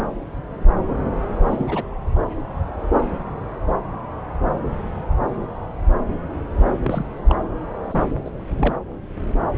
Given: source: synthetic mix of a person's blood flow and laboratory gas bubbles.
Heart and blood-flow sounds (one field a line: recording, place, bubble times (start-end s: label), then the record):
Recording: Doppler ultrasound of blood flow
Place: subclavian vein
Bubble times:
1.49-1.65 s: bubbles
1.67-1.85 s: bubbles
6.83-7.05 s: bubbles
7.29-7.37 s: bubbles
7.89-8.04 s: bubbles
8.24-8.30 s: bubbles
8.56-8.74 s: bubbles
From the record:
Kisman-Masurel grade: 222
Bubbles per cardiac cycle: several, 3 to 8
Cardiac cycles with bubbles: 10 to 50%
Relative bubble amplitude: moderate (0.250 to 0.450)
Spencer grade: 2 (many but less than half of the cardiac periods contain bubble signals, singularly or in groups)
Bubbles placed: anywhere in the cardiac cycle